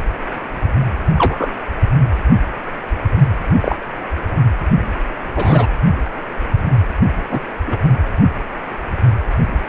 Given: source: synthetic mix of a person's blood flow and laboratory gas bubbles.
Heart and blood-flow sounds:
Doppler ultrasound of blood flow; precordium
1.18-1.52 s: bubbles
3.61-3.76 s: bubbles
5.36-5.67 s: bubbles
7.28-7.40 s: bubbles
7.67-7.76 s: bubbles
From the record:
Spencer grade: 2 (many but less than half of the cardiac periods contain bubble signals, singularly or in groups); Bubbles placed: anywhere in the cardiac cycle

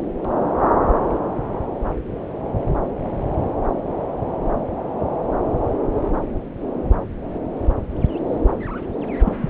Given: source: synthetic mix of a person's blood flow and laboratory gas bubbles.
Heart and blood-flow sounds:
Doppler ultrasound of blood flow; subclavian vein
9.25-9.33 s: bubbles
9.41-9.50 s: bubbles
From the record:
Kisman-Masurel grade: 223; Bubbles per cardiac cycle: several, 3 to 8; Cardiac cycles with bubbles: 10 to 50%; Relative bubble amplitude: loud (0.450 to 0.775); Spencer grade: 2 (many but less than half of the cardiac periods contain bubble signals, singularly or in groups); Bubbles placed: anywhere in the cardiac cycle

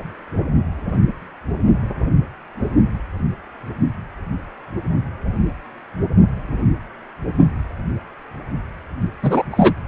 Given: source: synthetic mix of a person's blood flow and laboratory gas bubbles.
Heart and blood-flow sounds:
Doppler ultrasound of blood flow; precordium
9.23-9.43 s: bubbles
9.51-9.74 s: bubbles
From the record:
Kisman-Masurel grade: 213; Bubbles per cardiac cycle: several, 3 to 8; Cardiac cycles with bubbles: 1 to 10%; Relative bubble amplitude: loud (0.450 to 0.775); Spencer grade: 1 (occasional bubble signal discernible with the cardiac motion signal, with majority of cardiac periods free of bubbles); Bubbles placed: only in the low amplitude regions of the cardiac cycle

